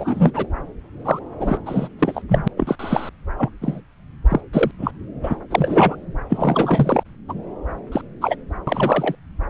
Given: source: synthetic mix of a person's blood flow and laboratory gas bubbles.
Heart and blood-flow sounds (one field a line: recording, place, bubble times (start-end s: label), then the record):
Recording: Doppler ultrasound of blood flow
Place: subclavian vein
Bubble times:
0.00-0.32 s: bubbles
0.36-0.47 s: bubbles
1.04-1.19 s: bubbles
1.40-1.57 s: bubbles
1.66-1.88 s: bubbles
1.98-2.22 s: bubbles
2.29-2.48 s: bubbles
2.56-2.75 s: bubbles
2.79-3.09 s: bubbles
3.38-3.50 s: bubbles
3.61-3.80 s: bubbles
4.29-4.41 s: bubbles
4.53-4.71 s: bubbles
4.79-4.91 s: bubbles
5.23-5.35 s: bubbles
5.50-5.96 s: bubbles
6.29-7.04 s: bubbles
7.28-7.33 s: bubbles
7.92-8.02 s: bubbles
8.21-8.36 s: bubbles
8.67-9.15 s: bubbles
From the record:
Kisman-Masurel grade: 243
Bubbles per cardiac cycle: several, 3 to 8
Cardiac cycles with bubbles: 100%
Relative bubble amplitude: loud (0.450 to 0.775)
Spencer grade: 3 (all of the cardiac periods contain showers or single bubble signals, but not dominating or overriding the cardiac motion signals)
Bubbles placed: anywhere in the cardiac cycle